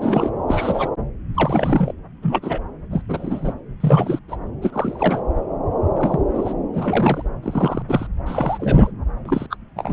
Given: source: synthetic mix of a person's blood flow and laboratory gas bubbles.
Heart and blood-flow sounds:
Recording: Doppler ultrasound of blood flow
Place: subclavian vein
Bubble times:
0.00-0.30 s: bubbles
0.47-0.90 s: bubbles
1.34-1.92 s: bubbles
2.22-2.40 s: bubbles
2.42-2.60 s: bubbles
2.91-3.02 s: bubbles
3.08-3.54 s: bubbles
3.80-4.19 s: bubbles
4.28-4.37 s: bubbles
4.62-5.21 s: bubbles
5.95-6.20 s: bubbles
6.34-6.54 s: bubbles
6.73-7.24 s: bubbles
7.43-7.82 s: bubbles
7.88-8.07 s: bubbles
8.26-8.91 s: bubbles
9.25-9.46 s: bubbles
9.50-9.57 s: bubbles
9.76-9.93 s: bubbles
From the record:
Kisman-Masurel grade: 242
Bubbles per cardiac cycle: several, 3 to 8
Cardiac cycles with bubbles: 100%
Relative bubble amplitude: moderate (0.250 to 0.450)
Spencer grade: 3 (all of the cardiac periods contain showers or single bubble signals, but not dominating or overriding the cardiac motion signals)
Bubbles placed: anywhere in the cardiac cycle

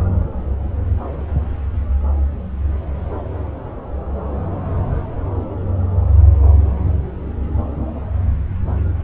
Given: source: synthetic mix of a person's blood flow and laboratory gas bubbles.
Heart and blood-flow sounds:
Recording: Doppler ultrasound of blood flow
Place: subclavian vein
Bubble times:
no bubbles
From the record:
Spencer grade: 0 (complete lack of bubble signals)

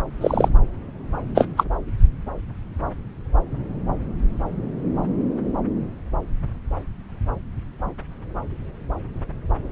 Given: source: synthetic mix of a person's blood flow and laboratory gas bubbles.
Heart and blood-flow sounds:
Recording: Doppler ultrasound of blood flow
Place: subclavian vein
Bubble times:
0.21-0.48 s: bubbles
1.34-1.46 s: bubbles
1.56-1.64 s: bubbles
From the record:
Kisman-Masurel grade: 123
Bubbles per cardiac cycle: 1 to 2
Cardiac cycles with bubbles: 10 to 50%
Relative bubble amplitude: loud (0.450 to 0.775)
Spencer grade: 2 (many but less than half of the cardiac periods contain bubble signals, singularly or in groups)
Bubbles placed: anywhere in the cardiac cycle

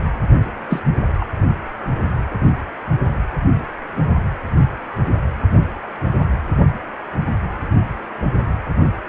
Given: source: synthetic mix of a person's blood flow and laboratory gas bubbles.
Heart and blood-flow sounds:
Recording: Doppler ultrasound of blood flow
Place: precordium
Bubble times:
0.70-0.80 s: bubbles
1.21-1.25 s: bubbles
From the record:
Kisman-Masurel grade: 112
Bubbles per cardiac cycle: 1 to 2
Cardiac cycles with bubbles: 1 to 10%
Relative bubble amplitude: moderate (0.250 to 0.450)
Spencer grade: 1 (occasional bubble signal discernible with the cardiac motion signal, with majority of cardiac periods free of bubbles)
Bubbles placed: anywhere in the cardiac cycle

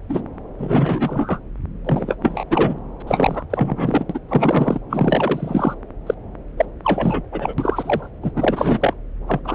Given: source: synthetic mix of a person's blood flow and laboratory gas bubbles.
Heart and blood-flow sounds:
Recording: Doppler ultrasound of blood flow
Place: subclavian vein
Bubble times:
0.09-0.21 s: bubbles
0.58-1.40 s: bubbles
1.84-2.16 s: bubbles
2.23-2.44 s: bubbles
2.50-2.78 s: bubbles
3.00-3.02 s: bubbles
3.07-3.45 s: bubbles
3.50-4.06 s: bubbles
4.10-4.19 s: bubbles
4.29-4.81 s: bubbles
4.90-5.75 s: bubbles
6.06-6.15 s: bubbles
6.57-6.66 s: bubbles
6.83-7.23 s: bubbles
7.32-7.54 s: bubbles
7.58-8.10 s: bubbles
8.22-8.32 s: bubbles
8.36-8.94 s: bubbles
9.28-9.40 s: bubbles
9.44-9.55 s: bubbles
From the record:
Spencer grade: 3 (all of the cardiac periods contain showers or single bubble signals, but not dominating or overriding the cardiac motion signals)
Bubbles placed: anywhere in the cardiac cycle

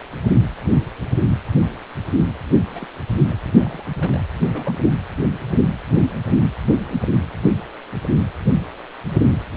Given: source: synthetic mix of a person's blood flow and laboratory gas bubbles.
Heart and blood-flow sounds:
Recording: Doppler ultrasound of blood flow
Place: precordium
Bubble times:
2.71-2.86 s: bubbles
3.21-3.40 s: bubbles
3.45-3.85 s: bubbles
3.96-4.20 s: bubbles
4.41-4.77 s: bubbles
4.87-4.96 s: bubbles
From the record:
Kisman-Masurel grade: 221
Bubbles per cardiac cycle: several, 3 to 8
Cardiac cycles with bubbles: 10 to 50%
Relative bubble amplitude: barely perceptible (0.100 to 0.250)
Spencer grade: 2 (many but less than half of the cardiac periods contain bubble signals, singularly or in groups)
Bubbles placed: anywhere in the cardiac cycle

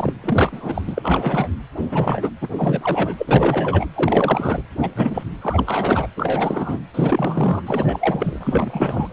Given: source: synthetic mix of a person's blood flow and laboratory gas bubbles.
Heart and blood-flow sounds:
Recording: Doppler ultrasound of blood flow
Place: precordium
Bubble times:
0.00-0.13 s: bubbles
0.23-0.82 s: bubbles
0.86-1.49 s: bubbles
1.91-2.30 s: bubbles
2.41-2.47 s: bubbles
2.56-3.14 s: bubbles
3.17-3.86 s: bubbles
3.96-4.62 s: bubbles
4.78-4.91 s: bubbles
4.95-5.24 s: bubbles
5.41-6.07 s: bubbles
6.17-6.78 s: bubbles
6.94-7.63 s: bubbles
7.67-9.13 s: bubbles
From the record:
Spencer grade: 3 (all of the cardiac periods contain showers or single bubble signals, but not dominating or overriding the cardiac motion signals)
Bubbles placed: anywhere in the cardiac cycle

